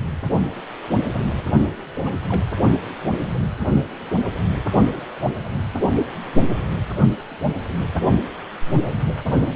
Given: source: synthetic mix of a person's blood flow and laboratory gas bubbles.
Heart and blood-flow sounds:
Doppler ultrasound of blood flow; precordium
1.91-2.42 s: bubbles
From the record:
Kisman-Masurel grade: 211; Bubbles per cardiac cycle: several, 3 to 8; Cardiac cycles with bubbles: 1 to 10%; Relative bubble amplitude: barely perceptible (0.100 to 0.250); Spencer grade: 1 (occasional bubble signal discernible with the cardiac motion signal, with majority of cardiac periods free of bubbles); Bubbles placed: only in the low amplitude regions of the cardiac cycle

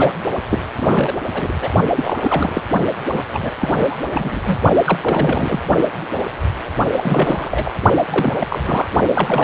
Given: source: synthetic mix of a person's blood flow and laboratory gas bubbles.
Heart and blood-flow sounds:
Doppler ultrasound of blood flow; precordium
0.00-0.12 s: bubbles
0.51-0.61 s: bubbles
0.76-1.15 s: bubbles
1.33-1.52 s: bubbles
1.60-1.73 s: bubbles
1.96-2.62 s: bubbles
3.13-3.24 s: bubbles
3.31-3.52 s: bubbles
3.58-3.98 s: bubbles
4.11-4.42 s: bubbles
4.46-4.58 s: bubbles
4.84-4.98 s: bubbles
5.01-5.60 s: bubbles
6.96-7.71 s: bubbles
8.10-8.60 s: bubbles
8.67-8.89 s: bubbles
9.13-9.44 s: bubbles
From the record:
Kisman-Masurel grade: 332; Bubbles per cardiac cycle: rolling drumbeat, 9 or more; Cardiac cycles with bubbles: 50 to 99%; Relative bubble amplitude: moderate (0.250 to 0.450); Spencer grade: 3 (all of the cardiac periods contain showers or single bubble signals, but not dominating or overriding the cardiac motion signals); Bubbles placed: only in the low amplitude regions of the cardiac cycle

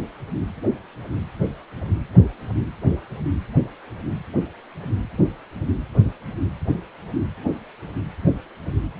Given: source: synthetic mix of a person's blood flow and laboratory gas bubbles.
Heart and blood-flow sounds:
Doppler ultrasound of blood flow; precordium
no bubbles
From the record:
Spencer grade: 0 (complete lack of bubble signals)

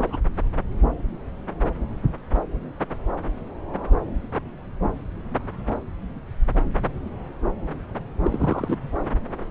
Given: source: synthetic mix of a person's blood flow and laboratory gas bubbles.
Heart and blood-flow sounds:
Doppler ultrasound of blood flow; subclavian vein
0.00-0.17 s: bubbles
8.24-8.77 s: bubbles
From the record:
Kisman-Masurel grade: 222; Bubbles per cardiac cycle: several, 3 to 8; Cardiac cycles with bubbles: 10 to 50%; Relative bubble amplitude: moderate (0.250 to 0.450); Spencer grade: 2 (many but less than half of the cardiac periods contain bubble signals, singularly or in groups); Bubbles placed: anywhere in the cardiac cycle

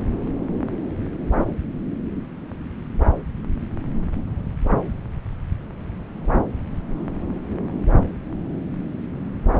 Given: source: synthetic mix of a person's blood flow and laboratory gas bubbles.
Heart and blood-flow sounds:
Doppler ultrasound of blood flow; subclavian vein
no bubbles
From the record:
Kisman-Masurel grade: 000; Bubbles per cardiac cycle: 0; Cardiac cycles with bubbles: 0%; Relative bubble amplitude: no bubbles discernible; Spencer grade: 0 (complete lack of bubble signals)

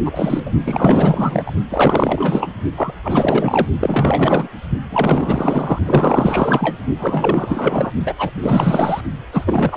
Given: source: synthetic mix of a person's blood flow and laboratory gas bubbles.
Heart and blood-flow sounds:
Doppler ultrasound of blood flow; precordium
0.05-0.52 s: bubbles
0.64-1.53 s: bubbles
1.70-2.49 s: bubbles
2.77-2.92 s: bubbles
3.03-3.67 s: bubbles
3.80-4.48 s: bubbles
4.90-5.79 s: bubbles
5.85-6.77 s: bubbles
6.97-7.91 s: bubbles
8.05-8.14 s: bubbles
8.17-8.30 s: bubbles
8.33-9.01 s: bubbles
9.32-9.77 s: bubbles
From the record:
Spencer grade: 4 (maximum detectable bubble signal sounding continuously throughout systole and diastole of every cardiac period, and overriding the amplitude of the normal cardiac signals); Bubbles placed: only in the low amplitude regions of the cardiac cycle

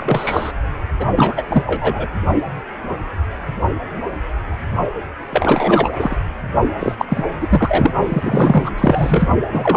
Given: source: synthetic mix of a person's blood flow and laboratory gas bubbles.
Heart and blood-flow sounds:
Doppler ultrasound of blood flow; precordium
0.00-0.52 s: bubbles
0.99-1.07 s: bubbles
1.16-1.64 s: bubbles
1.67-2.07 s: bubbles
5.30-6.17 s: bubbles
6.79-6.95 s: bubbles
6.98-7.05 s: bubbles
7.08-7.25 s: bubbles
7.40-7.94 s: bubbles
8.04-8.70 s: bubbles
8.77-9.32 s: bubbles
9.52-9.77 s: bubbles
From the record:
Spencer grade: 3 (all of the cardiac periods contain showers or single bubble signals, but not dominating or overriding the cardiac motion signals); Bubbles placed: anywhere in the cardiac cycle

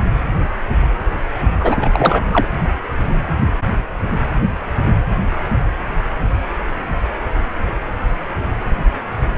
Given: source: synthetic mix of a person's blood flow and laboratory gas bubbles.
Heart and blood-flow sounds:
Doppler ultrasound of blood flow; precordium
1.59-2.25 s: bubbles
2.33-2.46 s: bubbles
From the record:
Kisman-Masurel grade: 223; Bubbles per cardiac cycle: several, 3 to 8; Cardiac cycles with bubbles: 10 to 50%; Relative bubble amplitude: loud (0.450 to 0.775); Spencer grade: 2 (many but less than half of the cardiac periods contain bubble signals, singularly or in groups); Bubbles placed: anywhere in the cardiac cycle

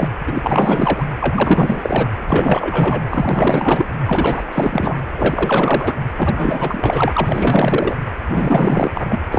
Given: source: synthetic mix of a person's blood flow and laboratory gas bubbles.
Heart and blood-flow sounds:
Doppler ultrasound of blood flow; precordium
0.00-0.09 s: bubbles
0.27-1.06 s: bubbles
1.20-2.08 s: bubbles
2.26-3.02 s: bubbles
3.10-3.87 s: bubbles
4.07-4.42 s: bubbles
4.52-5.00 s: bubbles
5.17-5.94 s: bubbles
6.17-7.96 s: bubbles
8.26-9.21 s: bubbles
9.31-9.39 s: bubbles
From the record:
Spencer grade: 4 (maximum detectable bubble signal sounding continuously throughout systole and diastole of every cardiac period, and overriding the amplitude of the normal cardiac signals); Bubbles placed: anywhere in the cardiac cycle

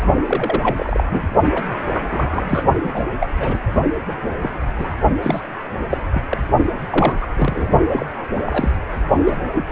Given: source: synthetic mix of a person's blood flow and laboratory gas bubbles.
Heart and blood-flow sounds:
Doppler ultrasound of blood flow; precordium
0.00-0.04 s: bubbles
0.27-1.02 s: bubbles
1.11-1.22 s: bubbles
1.55-1.62 s: bubbles
1.88-2.06 s: bubbles
2.10-2.64 s: bubbles
2.83-3.04 s: bubbles
3.20-3.27 s: bubbles
3.40-3.58 s: bubbles
4.08-4.17 s: bubbles
4.42-4.50 s: bubbles
4.78-4.95 s: bubbles
5.22-5.41 s: bubbles
5.89-5.97 s: bubbles
6.13-6.22 s: bubbles
6.30-6.38 s: bubbles
6.90-7.13 s: bubbles
7.21-7.26 s: bubbles
7.38-7.68 s: bubbles
7.88-8.05 s: bubbles
8.34-8.71 s: bubbles
9.26-9.40 s: bubbles
9.54-9.64 s: bubbles
From the record:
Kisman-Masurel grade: 242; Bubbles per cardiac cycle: several, 3 to 8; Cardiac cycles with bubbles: 100%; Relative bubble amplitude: moderate (0.250 to 0.450); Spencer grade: 3 (all of the cardiac periods contain showers or single bubble signals, but not dominating or overriding the cardiac motion signals); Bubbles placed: only in the low amplitude regions of the cardiac cycle

